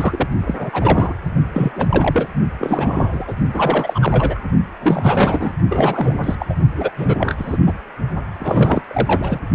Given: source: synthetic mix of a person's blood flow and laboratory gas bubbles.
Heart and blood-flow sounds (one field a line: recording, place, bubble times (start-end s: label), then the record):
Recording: Doppler ultrasound of blood flow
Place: precordium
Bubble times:
0.00-0.28 s: bubbles
0.47-1.14 s: bubbles
1.54-1.73 s: bubbles
1.75-1.85 s: bubbles
1.89-2.27 s: bubbles
2.59-3.33 s: bubbles
3.53-4.40 s: bubbles
4.81-5.51 s: bubbles
5.68-6.35 s: bubbles
6.39-6.46 s: bubbles
6.50-6.54 s: bubbles
6.75-6.92 s: bubbles
6.96-7.35 s: bubbles
7.38-7.57 s: bubbles
7.66-7.73 s: bubbles
8.40-8.83 s: bubbles
8.88-9.40 s: bubbles
From the record:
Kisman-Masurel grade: 343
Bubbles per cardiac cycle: rolling drumbeat, 9 or more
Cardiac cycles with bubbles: 100%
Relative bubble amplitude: loud (0.450 to 0.775)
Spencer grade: 3 (all of the cardiac periods contain showers or single bubble signals, but not dominating or overriding the cardiac motion signals)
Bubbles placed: only in the low amplitude regions of the cardiac cycle